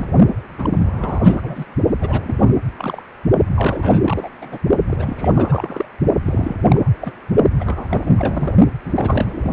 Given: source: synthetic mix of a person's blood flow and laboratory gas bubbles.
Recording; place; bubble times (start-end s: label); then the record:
Doppler ultrasound of blood flow; precordium
0.00-0.07 s: bubbles
0.58-1.65 s: bubbles
2.00-2.53 s: bubbles
2.78-3.01 s: bubbles
3.55-4.00 s: bubbles
4.04-4.29 s: bubbles
4.41-4.59 s: bubbles
4.87-5.32 s: bubbles
5.35-5.86 s: bubbles
6.25-6.57 s: bubbles
6.62-6.90 s: bubbles
7.00-7.12 s: bubbles
7.59-8.14 s: bubbles
8.17-8.53 s: bubbles
8.84-9.53 s: bubbles
From the record:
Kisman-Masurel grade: 342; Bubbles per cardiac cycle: rolling drumbeat, 9 or more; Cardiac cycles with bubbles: 100%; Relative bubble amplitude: moderate (0.250 to 0.450); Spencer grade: 3 (all of the cardiac periods contain showers or single bubble signals, but not dominating or overriding the cardiac motion signals); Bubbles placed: only in the low amplitude regions of the cardiac cycle